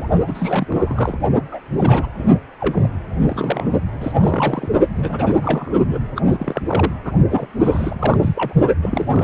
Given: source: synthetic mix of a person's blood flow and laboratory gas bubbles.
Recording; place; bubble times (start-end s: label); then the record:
Doppler ultrasound of blood flow; precordium
0.00-0.08 s: bubbles
0.28-1.16 s: bubbles
1.51-1.59 s: bubbles
1.72-2.08 s: bubbles
2.18-2.28 s: bubbles
2.60-2.91 s: bubbles
3.27-3.71 s: bubbles
4.00-4.72 s: bubbles
4.94-5.73 s: bubbles
5.88-6.00 s: bubbles
6.15-6.21 s: bubbles
6.31-6.62 s: bubbles
6.66-6.92 s: bubbles
7.05-7.12 s: bubbles
7.29-7.47 s: bubbles
7.63-8.17 s: bubbles
8.21-8.53 s: bubbles
8.82-9.24 s: bubbles
From the record:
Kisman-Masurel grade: 332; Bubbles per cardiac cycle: rolling drumbeat, 9 or more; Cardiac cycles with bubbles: 50 to 99%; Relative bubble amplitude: moderate (0.250 to 0.450); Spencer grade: 3 (all of the cardiac periods contain showers or single bubble signals, but not dominating or overriding the cardiac motion signals); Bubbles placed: only in the low amplitude regions of the cardiac cycle